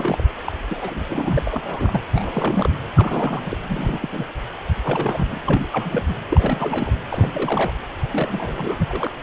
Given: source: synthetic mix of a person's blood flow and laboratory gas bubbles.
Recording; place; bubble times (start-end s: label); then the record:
Doppler ultrasound of blood flow; precordium
0.00-0.22 s: bubbles
0.45-0.52 s: bubbles
0.69-1.04 s: bubbles
1.09-1.43 s: bubbles
1.47-2.03 s: bubbles
2.13-2.70 s: bubbles
2.95-3.58 s: bubbles
3.69-4.28 s: bubbles
4.83-5.38 s: bubbles
5.42-5.67 s: bubbles
5.72-6.03 s: bubbles
6.29-6.92 s: bubbles
7.12-7.31 s: bubbles
7.34-7.73 s: bubbles
8.11-9.07 s: bubbles
From the record:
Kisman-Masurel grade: 342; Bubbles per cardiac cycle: rolling drumbeat, 9 or more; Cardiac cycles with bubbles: 100%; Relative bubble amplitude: moderate (0.250 to 0.450); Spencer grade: 3 (all of the cardiac periods contain showers or single bubble signals, but not dominating or overriding the cardiac motion signals); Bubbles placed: anywhere in the cardiac cycle